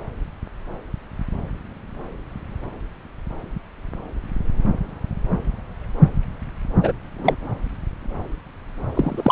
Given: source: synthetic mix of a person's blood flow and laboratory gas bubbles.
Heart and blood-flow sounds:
Doppler ultrasound of blood flow; subclavian vein
6.83-6.92 s: bubbles
7.18-7.36 s: bubbles
8.94-9.31 s: bubbles
From the record:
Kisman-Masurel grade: 213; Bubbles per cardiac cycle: several, 3 to 8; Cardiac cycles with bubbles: 1 to 10%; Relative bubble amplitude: loud (0.450 to 0.775); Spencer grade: 1 (occasional bubble signal discernible with the cardiac motion signal, with majority of cardiac periods free of bubbles); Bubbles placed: anywhere in the cardiac cycle

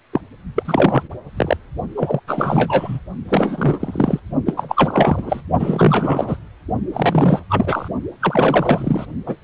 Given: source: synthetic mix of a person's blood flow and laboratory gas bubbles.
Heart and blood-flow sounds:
Doppler ultrasound of blood flow; precordium
0.12-0.21 s: bubbles
0.55-1.09 s: bubbles
1.36-1.57 s: bubbles
1.96-2.20 s: bubbles
2.27-2.99 s: bubbles
3.28-4.20 s: bubbles
4.46-4.54 s: bubbles
4.57-5.44 s: bubbles
5.59-6.37 s: bubbles
6.93-7.43 s: bubbles
7.49-7.88 s: bubbles
8.20-9.06 s: bubbles
9.26-9.36 s: bubbles
From the record:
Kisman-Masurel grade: 343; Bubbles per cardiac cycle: rolling drumbeat, 9 or more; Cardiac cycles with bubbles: 100%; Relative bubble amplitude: loud (0.450 to 0.775); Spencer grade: 3 (all of the cardiac periods contain showers or single bubble signals, but not dominating or overriding the cardiac motion signals); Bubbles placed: only in the low amplitude regions of the cardiac cycle

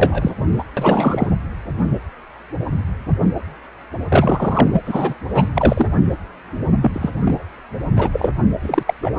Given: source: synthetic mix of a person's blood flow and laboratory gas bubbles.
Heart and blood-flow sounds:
Doppler ultrasound of blood flow; precordium
0.00-0.32 s: bubbles
0.58-0.64 s: bubbles
0.77-1.27 s: bubbles
4.09-4.67 s: bubbles
4.72-4.82 s: bubbles
4.85-5.14 s: bubbles
5.34-5.51 s: bubbles
5.55-5.86 s: bubbles
6.81-7.10 s: bubbles
7.25-7.44 s: bubbles
7.96-8.10 s: bubbles
8.12-8.33 s: bubbles
8.62-8.83 s: bubbles
8.87-8.94 s: bubbles
9.02-9.11 s: bubbles
From the record:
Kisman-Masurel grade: 233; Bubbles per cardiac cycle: several, 3 to 8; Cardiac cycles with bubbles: 50 to 99%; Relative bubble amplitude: loud (0.450 to 0.775); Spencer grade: 3 (all of the cardiac periods contain showers or single bubble signals, but not dominating or overriding the cardiac motion signals); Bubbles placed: anywhere in the cardiac cycle

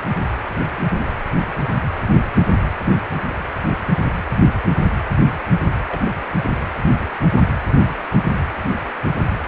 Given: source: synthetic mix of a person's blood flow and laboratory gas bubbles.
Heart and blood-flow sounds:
Doppler ultrasound of blood flow; precordium
0.92-1.11 s: bubbles
5.88-6.01 s: bubbles
6.04-6.12 s: bubbles
From the record:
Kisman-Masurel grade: 121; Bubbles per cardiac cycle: 1 to 2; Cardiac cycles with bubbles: 10 to 50%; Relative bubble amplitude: barely perceptible (0.100 to 0.250); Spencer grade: 2 (many but less than half of the cardiac periods contain bubble signals, singularly or in groups); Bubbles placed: anywhere in the cardiac cycle

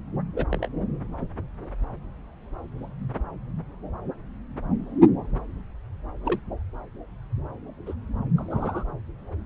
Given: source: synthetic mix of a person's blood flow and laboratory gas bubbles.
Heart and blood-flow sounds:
Doppler ultrasound of blood flow; subclavian vein
0.36-0.46 s: bubbles
0.51-0.68 s: bubbles
6.25-6.40 s: bubbles
7.86-7.94 s: bubbles
8.37-8.84 s: bubbles
From the record:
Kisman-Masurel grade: 121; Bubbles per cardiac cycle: 1 to 2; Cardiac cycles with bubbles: 10 to 50%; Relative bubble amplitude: barely perceptible (0.100 to 0.250); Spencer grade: 2 (many but less than half of the cardiac periods contain bubble signals, singularly or in groups); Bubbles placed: anywhere in the cardiac cycle

